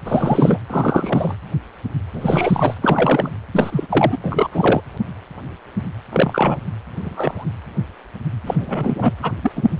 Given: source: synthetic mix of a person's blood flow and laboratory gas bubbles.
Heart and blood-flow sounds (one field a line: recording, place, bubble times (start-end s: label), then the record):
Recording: Doppler ultrasound of blood flow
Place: precordium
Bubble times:
0.05-0.60 s: bubbles
0.69-1.35 s: bubbles
2.13-2.74 s: bubbles
2.82-3.30 s: bubbles
3.53-4.17 s: bubbles
4.24-4.48 s: bubbles
4.51-4.81 s: bubbles
6.12-6.58 s: bubbles
7.01-7.50 s: bubbles
8.46-9.13 s: bubbles
9.22-9.32 s: bubbles
9.43-9.52 s: bubbles
9.55-9.75 s: bubbles
From the record:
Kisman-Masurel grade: 233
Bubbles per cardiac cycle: several, 3 to 8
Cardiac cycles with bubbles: 50 to 99%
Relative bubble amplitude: loud (0.450 to 0.775)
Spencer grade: 3 (all of the cardiac periods contain showers or single bubble signals, but not dominating or overriding the cardiac motion signals)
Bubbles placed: anywhere in the cardiac cycle